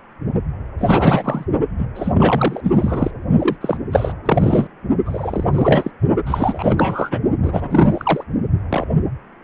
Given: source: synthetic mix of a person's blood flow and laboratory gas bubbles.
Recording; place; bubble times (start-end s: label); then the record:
Doppler ultrasound of blood flow; precordium
0.79-1.45 s: bubbles
1.79-1.87 s: bubbles
1.94-2.60 s: bubbles
2.64-3.10 s: bubbles
3.39-3.56 s: bubbles
3.60-3.77 s: bubbles
3.91-4.13 s: bubbles
4.25-4.67 s: bubbles
5.05-5.44 s: bubbles
5.53-5.91 s: bubbles
6.25-7.19 s: bubbles
7.42-8.24 s: bubbles
8.70-8.85 s: bubbles
From the record:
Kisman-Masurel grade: 343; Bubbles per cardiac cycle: rolling drumbeat, 9 or more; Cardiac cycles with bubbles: 100%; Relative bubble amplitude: loud (0.450 to 0.775); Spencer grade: 3 (all of the cardiac periods contain showers or single bubble signals, but not dominating or overriding the cardiac motion signals); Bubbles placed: only in the low amplitude regions of the cardiac cycle